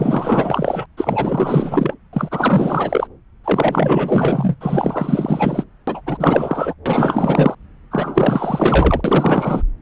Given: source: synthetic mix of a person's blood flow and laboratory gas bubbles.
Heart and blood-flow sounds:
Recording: Doppler ultrasound of blood flow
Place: subclavian vein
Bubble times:
0.00-0.86 s: bubbles
0.97-1.94 s: bubbles
2.12-3.08 s: bubbles
3.44-4.56 s: bubbles
4.60-5.64 s: bubbles
5.87-6.01 s: bubbles
6.06-6.75 s: bubbles
6.86-7.55 s: bubbles
7.91-9.01 s: bubbles
9.04-9.62 s: bubbles
From the record:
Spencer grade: 4 (maximum detectable bubble signal sounding continuously throughout systole and diastole of every cardiac period, and overriding the amplitude of the normal cardiac signals)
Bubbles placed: anywhere in the cardiac cycle

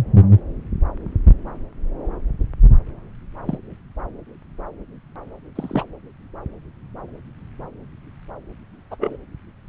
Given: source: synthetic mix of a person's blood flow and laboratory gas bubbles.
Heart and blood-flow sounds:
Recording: Doppler ultrasound of blood flow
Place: subclavian vein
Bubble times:
3.46-3.58 s: bubbles
5.55-5.84 s: bubbles
8.91-8.96 s: bubbles
9.01-9.17 s: bubbles
From the record:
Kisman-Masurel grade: 122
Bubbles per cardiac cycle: 1 to 2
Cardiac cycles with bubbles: 10 to 50%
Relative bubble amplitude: moderate (0.250 to 0.450)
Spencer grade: 2 (many but less than half of the cardiac periods contain bubble signals, singularly or in groups)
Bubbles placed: anywhere in the cardiac cycle

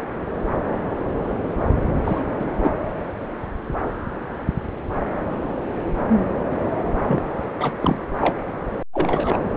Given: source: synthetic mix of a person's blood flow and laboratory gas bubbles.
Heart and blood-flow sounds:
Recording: Doppler ultrasound of blood flow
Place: subclavian vein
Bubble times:
2.04-2.21 s: bubbles
2.39-2.46 s: bubbles
2.59-2.72 s: bubbles
7.08-7.23 s: bubbles
7.58-7.73 s: bubbles
7.82-7.98 s: bubbles
8.21-8.36 s: bubbles
8.94-9.38 s: bubbles
From the record:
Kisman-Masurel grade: 222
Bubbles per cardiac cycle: several, 3 to 8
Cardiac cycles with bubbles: 10 to 50%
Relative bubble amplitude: moderate (0.250 to 0.450)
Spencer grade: 2 (many but less than half of the cardiac periods contain bubble signals, singularly or in groups)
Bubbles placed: anywhere in the cardiac cycle

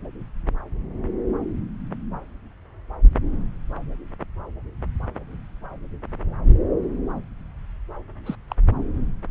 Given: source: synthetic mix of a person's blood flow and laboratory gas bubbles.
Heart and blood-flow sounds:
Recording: Doppler ultrasound of blood flow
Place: subclavian vein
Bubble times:
8.25-8.36 s: bubbles
8.48-8.55 s: bubbles
From the record:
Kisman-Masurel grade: 111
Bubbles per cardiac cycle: 1 to 2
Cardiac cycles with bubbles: 1 to 10%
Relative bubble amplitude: barely perceptible (0.100 to 0.250)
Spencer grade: 1 (occasional bubble signal discernible with the cardiac motion signal, with majority of cardiac periods free of bubbles)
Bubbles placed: anywhere in the cardiac cycle

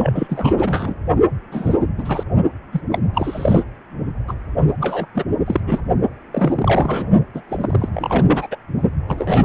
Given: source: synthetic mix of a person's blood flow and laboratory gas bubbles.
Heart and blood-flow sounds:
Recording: Doppler ultrasound of blood flow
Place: precordium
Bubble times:
0.00-0.93 s: bubbles
1.51-1.87 s: bubbles
1.97-2.24 s: bubbles
2.73-2.81 s: bubbles
2.92-2.99 s: bubbles
3.14-3.64 s: bubbles
4.28-4.34 s: bubbles
4.80-5.06 s: bubbles
5.14-5.24 s: bubbles
5.46-5.60 s: bubbles
5.67-5.80 s: bubbles
6.33-7.11 s: bubbles
7.34-7.42 s: bubbles
7.49-7.89 s: bubbles
7.92-8.47 s: bubbles
8.51-8.56 s: bubbles
9.07-9.45 s: bubbles
From the record:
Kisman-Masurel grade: 342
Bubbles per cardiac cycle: rolling drumbeat, 9 or more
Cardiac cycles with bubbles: 100%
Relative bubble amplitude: moderate (0.250 to 0.450)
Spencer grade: 3 (all of the cardiac periods contain showers or single bubble signals, but not dominating or overriding the cardiac motion signals)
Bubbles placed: only in the low amplitude regions of the cardiac cycle

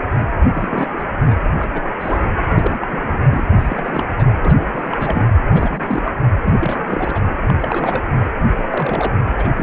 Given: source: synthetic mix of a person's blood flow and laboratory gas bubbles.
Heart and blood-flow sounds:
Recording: Doppler ultrasound of blood flow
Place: precordium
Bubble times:
0.19-0.27 s: bubbles
0.48-0.93 s: bubbles
0.99-1.04 s: bubbles
1.22-1.38 s: bubbles
1.58-1.67 s: bubbles
1.71-1.83 s: bubbles
2.00-2.27 s: bubbles
2.48-3.19 s: bubbles
3.31-3.43 s: bubbles
3.59-4.04 s: bubbles
4.16-4.27 s: bubbles
4.41-4.66 s: bubbles
4.73-5.27 s: bubbles
5.45-6.02 s: bubbles
6.05-6.12 s: bubbles
6.44-7.20 s: bubbles
7.42-7.53 s: bubbles
7.60-8.09 s: bubbles
8.21-8.32 s: bubbles
8.57-8.64 s: bubbles
8.70-9.12 s: bubbles
9.38-9.48 s: bubbles
9.56-9.63 s: bubbles
From the record:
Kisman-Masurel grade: 342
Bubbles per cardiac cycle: rolling drumbeat, 9 or more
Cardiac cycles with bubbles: 100%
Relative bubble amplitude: moderate (0.250 to 0.450)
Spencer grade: 3 (all of the cardiac periods contain showers or single bubble signals, but not dominating or overriding the cardiac motion signals)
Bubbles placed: anywhere in the cardiac cycle

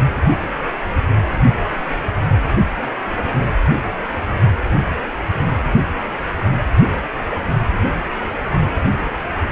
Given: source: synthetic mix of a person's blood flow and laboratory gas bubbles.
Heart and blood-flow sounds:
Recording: Doppler ultrasound of blood flow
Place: precordium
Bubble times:
no bubbles
From the record:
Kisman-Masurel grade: 000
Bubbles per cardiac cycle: 0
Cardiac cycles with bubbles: 0%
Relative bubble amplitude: no bubbles discernible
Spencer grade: 0 (complete lack of bubble signals)

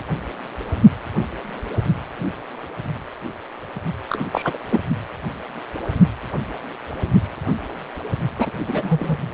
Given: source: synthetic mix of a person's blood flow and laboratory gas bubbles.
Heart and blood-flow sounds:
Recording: Doppler ultrasound of blood flow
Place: precordium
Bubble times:
4.09-4.28 s: bubbles
4.33-4.58 s: bubbles
4.70-4.82 s: bubbles
8.38-8.51 s: bubbles
8.67-9.18 s: bubbles
From the record:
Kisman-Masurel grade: 222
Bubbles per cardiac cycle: several, 3 to 8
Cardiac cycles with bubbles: 10 to 50%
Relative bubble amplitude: moderate (0.250 to 0.450)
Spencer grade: 2 (many but less than half of the cardiac periods contain bubble signals, singularly or in groups)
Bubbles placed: only in the low amplitude regions of the cardiac cycle

